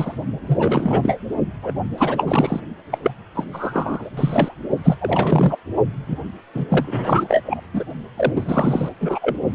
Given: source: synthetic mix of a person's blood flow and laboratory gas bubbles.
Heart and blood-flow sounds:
Doppler ultrasound of blood flow; precordium
0.00-0.15 s: bubbles
0.47-1.18 s: bubbles
1.62-1.72 s: bubbles
1.98-2.60 s: bubbles
2.92-2.98 s: bubbles
3.03-3.11 s: bubbles
3.34-3.44 s: bubbles
3.52-4.10 s: bubbles
4.17-4.55 s: bubbles
4.84-5.56 s: bubbles
6.07-6.19 s: bubbles
6.54-6.65 s: bubbles
6.69-7.43 s: bubbles
7.46-7.61 s: bubbles
7.74-7.84 s: bubbles
8.16-8.89 s: bubbles
9.00-9.19 s: bubbles
9.21-9.36 s: bubbles
From the record:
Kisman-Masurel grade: 343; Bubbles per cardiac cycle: rolling drumbeat, 9 or more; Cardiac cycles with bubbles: 100%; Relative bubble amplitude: loud (0.450 to 0.775); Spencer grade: 3 (all of the cardiac periods contain showers or single bubble signals, but not dominating or overriding the cardiac motion signals); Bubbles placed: only in the low amplitude regions of the cardiac cycle

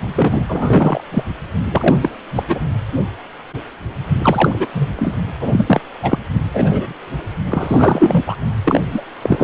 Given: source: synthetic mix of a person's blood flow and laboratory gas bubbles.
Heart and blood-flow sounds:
Doppler ultrasound of blood flow; precordium
0.01-0.44 s: bubbles
0.49-1.01 s: bubbles
1.11-1.24 s: bubbles
1.71-1.98 s: bubbles
2.02-2.09 s: bubbles
2.35-2.45 s: bubbles
2.48-2.60 s: bubbles
4.22-4.67 s: bubbles
4.74-4.92 s: bubbles
4.96-5.17 s: bubbles
5.41-5.80 s: bubbles
6.03-6.19 s: bubbles
6.54-6.94 s: bubbles
7.49-8.23 s: bubbles
8.27-8.37 s: bubbles
8.65-8.81 s: bubbles
8.90-9.02 s: bubbles
9.22-9.44 s: bubbles
From the record:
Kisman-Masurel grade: 233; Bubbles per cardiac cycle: several, 3 to 8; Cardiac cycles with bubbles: 50 to 99%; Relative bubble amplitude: loud (0.450 to 0.775); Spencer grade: 3 (all of the cardiac periods contain showers or single bubble signals, but not dominating or overriding the cardiac motion signals); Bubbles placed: anywhere in the cardiac cycle

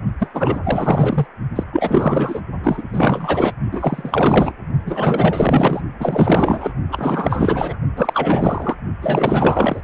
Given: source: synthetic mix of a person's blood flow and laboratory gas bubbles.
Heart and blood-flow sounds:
Doppler ultrasound of blood flow; precordium
0.19-0.30 s: bubbles
0.33-0.60 s: bubbles
0.64-1.26 s: bubbles
1.55-1.64 s: bubbles
1.72-2.40 s: bubbles
2.63-2.83 s: bubbles
2.92-3.52 s: bubbles
3.71-4.53 s: bubbles
4.85-5.81 s: bubbles
6.00-6.72 s: bubbles
6.91-7.76 s: bubbles
7.96-8.76 s: bubbles
9.02-9.80 s: bubbles
From the record:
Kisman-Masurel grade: 444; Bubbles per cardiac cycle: continuous sound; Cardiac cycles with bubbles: 100%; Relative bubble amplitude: maximal (0.775 to 0.999); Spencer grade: 4 (maximum detectable bubble signal sounding continuously throughout systole and diastole of every cardiac period, and overriding the amplitude of the normal cardiac signals); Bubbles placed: only in the low amplitude regions of the cardiac cycle

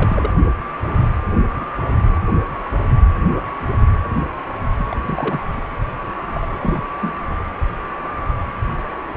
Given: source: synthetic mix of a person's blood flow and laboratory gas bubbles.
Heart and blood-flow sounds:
Doppler ultrasound of blood flow; precordium
0.00-0.30 s: bubbles
1.54-1.66 s: bubbles
2.12-2.21 s: bubbles
4.87-5.39 s: bubbles
6.17-6.22 s: bubbles
6.26-6.92 s: bubbles
7.02-7.13 s: bubbles
From the record:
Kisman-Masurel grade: 221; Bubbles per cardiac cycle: several, 3 to 8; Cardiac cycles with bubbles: 10 to 50%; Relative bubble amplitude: barely perceptible (0.100 to 0.250); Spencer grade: 2 (many but less than half of the cardiac periods contain bubble signals, singularly or in groups); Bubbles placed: only in the low amplitude regions of the cardiac cycle

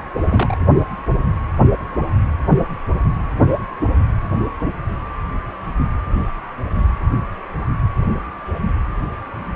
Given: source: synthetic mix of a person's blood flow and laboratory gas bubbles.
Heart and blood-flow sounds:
Doppler ultrasound of blood flow; precordium
0.30-0.57 s: bubbles
From the record:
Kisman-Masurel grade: 212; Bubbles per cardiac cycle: several, 3 to 8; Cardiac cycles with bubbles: 1 to 10%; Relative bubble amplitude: moderate (0.250 to 0.450); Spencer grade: 1 (occasional bubble signal discernible with the cardiac motion signal, with majority of cardiac periods free of bubbles); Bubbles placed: anywhere in the cardiac cycle

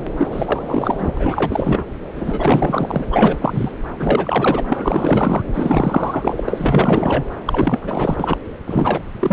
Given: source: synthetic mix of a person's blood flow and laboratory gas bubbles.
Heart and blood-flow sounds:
Doppler ultrasound of blood flow; subclavian vein
0.17-0.28 s: bubbles
0.31-1.14 s: bubbles
1.17-1.84 s: bubbles
2.16-3.06 s: bubbles
3.12-3.71 s: bubbles
3.98-4.63 s: bubbles
4.67-5.44 s: bubbles
5.54-7.25 s: bubbles
7.46-8.38 s: bubbles
8.66-9.03 s: bubbles
9.20-9.33 s: bubbles
From the record:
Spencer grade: 4 (maximum detectable bubble signal sounding continuously throughout systole and diastole of every cardiac period, and overriding the amplitude of the normal cardiac signals); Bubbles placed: anywhere in the cardiac cycle

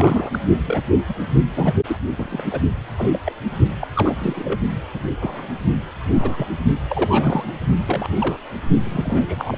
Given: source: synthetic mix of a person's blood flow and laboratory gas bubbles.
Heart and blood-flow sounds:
Doppler ultrasound of blood flow; precordium
0.00-0.39 s: bubbles
0.67-0.82 s: bubbles
1.08-1.13 s: bubbles
1.55-1.74 s: bubbles
1.88-1.97 s: bubbles
2.18-2.44 s: bubbles
2.51-2.61 s: bubbles
2.98-3.19 s: bubbles
3.25-3.33 s: bubbles
3.81-3.88 s: bubbles
3.95-4.59 s: bubbles
4.94-5.03 s: bubbles
5.21-5.49 s: bubbles
6.12-6.48 s: bubbles
6.88-7.54 s: bubbles
7.86-8.11 s: bubbles
8.19-8.38 s: bubbles
8.85-9.58 s: bubbles
From the record:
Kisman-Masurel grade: 242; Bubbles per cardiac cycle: several, 3 to 8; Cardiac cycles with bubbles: 100%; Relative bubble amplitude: moderate (0.250 to 0.450); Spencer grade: 3 (all of the cardiac periods contain showers or single bubble signals, but not dominating or overriding the cardiac motion signals); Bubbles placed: only in the low amplitude regions of the cardiac cycle

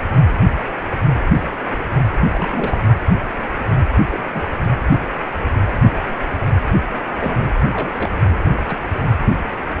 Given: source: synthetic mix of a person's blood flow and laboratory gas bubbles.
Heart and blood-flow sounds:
Doppler ultrasound of blood flow; precordium
2.31-2.78 s: bubbles
4.11-4.24 s: bubbles
4.34-4.49 s: bubbles
4.63-4.67 s: bubbles
7.13-7.38 s: bubbles
7.42-7.50 s: bubbles
7.73-8.15 s: bubbles
8.21-8.63 s: bubbles
8.67-8.79 s: bubbles
From the record:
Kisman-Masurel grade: 221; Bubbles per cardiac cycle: several, 3 to 8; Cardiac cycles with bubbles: 10 to 50%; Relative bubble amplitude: barely perceptible (0.100 to 0.250); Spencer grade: 2 (many but less than half of the cardiac periods contain bubble signals, singularly or in groups); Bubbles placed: only in the low amplitude regions of the cardiac cycle

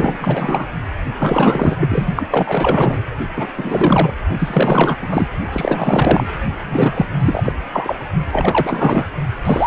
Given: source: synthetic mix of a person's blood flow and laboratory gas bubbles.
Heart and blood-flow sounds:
Doppler ultrasound of blood flow; precordium
0.00-0.67 s: bubbles
1.19-1.77 s: bubbles
1.79-2.07 s: bubbles
2.15-3.04 s: bubbles
3.36-3.46 s: bubbles
3.56-4.13 s: bubbles
4.38-4.98 s: bubbles
5.01-5.29 s: bubbles
5.52-6.27 s: bubbles
6.57-7.05 s: bubbles
7.20-7.53 s: bubbles
7.72-8.00 s: bubbles
8.32-9.08 s: bubbles
9.45-9.67 s: bubbles
From the record:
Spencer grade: 4 (maximum detectable bubble signal sounding continuously throughout systole and diastole of every cardiac period, and overriding the amplitude of the normal cardiac signals); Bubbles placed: only in the low amplitude regions of the cardiac cycle

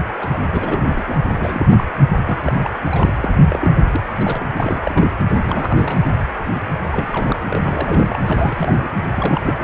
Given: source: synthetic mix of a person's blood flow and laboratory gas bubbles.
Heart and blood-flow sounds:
Doppler ultrasound of blood flow; precordium
0.20-0.28 s: bubbles
0.33-0.38 s: bubbles
0.48-1.18 s: bubbles
1.38-1.84 s: bubbles
2.27-2.76 s: bubbles
2.90-3.31 s: bubbles
3.49-3.71 s: bubbles
3.77-3.85 s: bubbles
3.92-4.01 s: bubbles
4.17-4.43 s: bubbles
4.57-4.80 s: bubbles
4.83-5.10 s: bubbles
5.45-6.01 s: bubbles
6.83-6.87 s: bubbles
6.92-7.39 s: bubbles
7.49-8.20 s: bubbles
8.27-8.89 s: bubbles
9.15-9.64 s: bubbles
From the record:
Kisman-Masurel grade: 342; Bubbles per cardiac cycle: rolling drumbeat, 9 or more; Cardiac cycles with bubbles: 100%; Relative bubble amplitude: moderate (0.250 to 0.450); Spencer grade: 3 (all of the cardiac periods contain showers or single bubble signals, but not dominating or overriding the cardiac motion signals); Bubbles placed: anywhere in the cardiac cycle

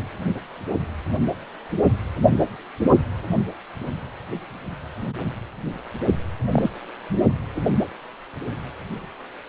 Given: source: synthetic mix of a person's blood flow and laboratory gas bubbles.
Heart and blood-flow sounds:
Doppler ultrasound of blood flow; precordium
6.51-6.69 s: bubbles
From the record:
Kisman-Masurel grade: 112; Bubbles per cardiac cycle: 1 to 2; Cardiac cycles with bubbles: 1 to 10%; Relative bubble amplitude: moderate (0.250 to 0.450); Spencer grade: 1 (occasional bubble signal discernible with the cardiac motion signal, with majority of cardiac periods free of bubbles); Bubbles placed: only in the low amplitude regions of the cardiac cycle

